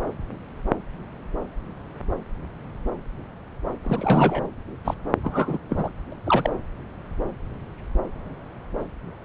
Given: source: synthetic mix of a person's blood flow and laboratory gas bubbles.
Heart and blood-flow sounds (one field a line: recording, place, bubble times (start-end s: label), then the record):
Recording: Doppler ultrasound of blood flow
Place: subclavian vein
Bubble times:
3.83-4.45 s: bubbles
4.84-4.94 s: bubbles
5.24-5.58 s: bubbles
5.69-5.90 s: bubbles
6.25-6.53 s: bubbles
From the record:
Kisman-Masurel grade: 222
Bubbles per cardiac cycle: several, 3 to 8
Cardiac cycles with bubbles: 10 to 50%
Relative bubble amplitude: moderate (0.250 to 0.450)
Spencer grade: 2 (many but less than half of the cardiac periods contain bubble signals, singularly or in groups)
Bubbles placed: anywhere in the cardiac cycle